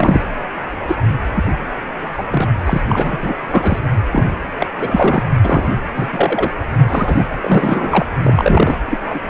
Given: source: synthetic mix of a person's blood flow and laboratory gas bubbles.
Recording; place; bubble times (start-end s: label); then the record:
Doppler ultrasound of blood flow; precordium
0.00-0.22 s: bubbles
0.88-0.96 s: bubbles
1.33-1.50 s: bubbles
2.13-2.24 s: bubbles
2.28-2.50 s: bubbles
2.65-2.81 s: bubbles
2.88-3.17 s: bubbles
3.21-3.35 s: bubbles
3.51-3.79 s: bubbles
4.12-4.29 s: bubbles
4.59-4.67 s: bubbles
4.79-5.26 s: bubbles
5.43-5.78 s: bubbles
5.95-6.09 s: bubbles
6.12-6.51 s: bubbles
6.78-6.85 s: bubbles
6.88-7.28 s: bubbles
7.41-8.06 s: bubbles
8.23-8.78 s: bubbles
8.91-9.00 s: bubbles
9.05-9.19 s: bubbles
From the record:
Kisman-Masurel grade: 243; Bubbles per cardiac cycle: several, 3 to 8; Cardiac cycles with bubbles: 100%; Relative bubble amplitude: loud (0.450 to 0.775); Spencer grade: 3 (all of the cardiac periods contain showers or single bubble signals, but not dominating or overriding the cardiac motion signals); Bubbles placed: anywhere in the cardiac cycle